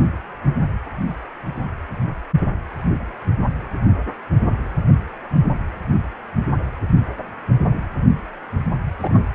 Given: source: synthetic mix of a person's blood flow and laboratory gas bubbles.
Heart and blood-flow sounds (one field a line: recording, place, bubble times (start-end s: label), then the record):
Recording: Doppler ultrasound of blood flow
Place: precordium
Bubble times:
9.02-9.26 s: bubbles
From the record:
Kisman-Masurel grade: 121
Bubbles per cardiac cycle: 1 to 2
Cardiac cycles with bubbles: 10 to 50%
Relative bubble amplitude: barely perceptible (0.100 to 0.250)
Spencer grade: 2 (many but less than half of the cardiac periods contain bubble signals, singularly or in groups)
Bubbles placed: anywhere in the cardiac cycle